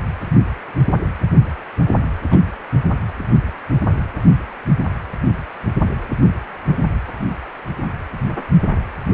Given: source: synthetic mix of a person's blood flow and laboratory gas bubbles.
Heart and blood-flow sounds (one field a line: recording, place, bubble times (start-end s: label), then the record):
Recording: Doppler ultrasound of blood flow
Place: precordium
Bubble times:
2.31-2.42 s: bubbles
From the record:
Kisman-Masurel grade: 121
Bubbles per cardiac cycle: 1 to 2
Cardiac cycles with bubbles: 10 to 50%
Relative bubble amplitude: barely perceptible (0.100 to 0.250)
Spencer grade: 2 (many but less than half of the cardiac periods contain bubble signals, singularly or in groups)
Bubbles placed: anywhere in the cardiac cycle